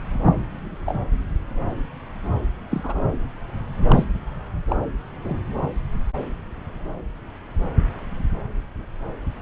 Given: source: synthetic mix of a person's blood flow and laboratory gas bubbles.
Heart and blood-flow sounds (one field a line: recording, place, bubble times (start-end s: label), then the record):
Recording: Doppler ultrasound of blood flow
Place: subclavian vein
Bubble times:
0.26-0.32 s: bubbles
0.86-0.99 s: bubbles
2.70-3.03 s: bubbles
3.88-4.04 s: bubbles
4.68-4.76 s: bubbles
5.24-5.41 s: bubbles
From the record:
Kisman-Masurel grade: 121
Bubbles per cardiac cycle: 1 to 2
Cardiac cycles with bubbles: 10 to 50%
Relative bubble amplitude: barely perceptible (0.100 to 0.250)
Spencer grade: 2 (many but less than half of the cardiac periods contain bubble signals, singularly or in groups)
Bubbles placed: anywhere in the cardiac cycle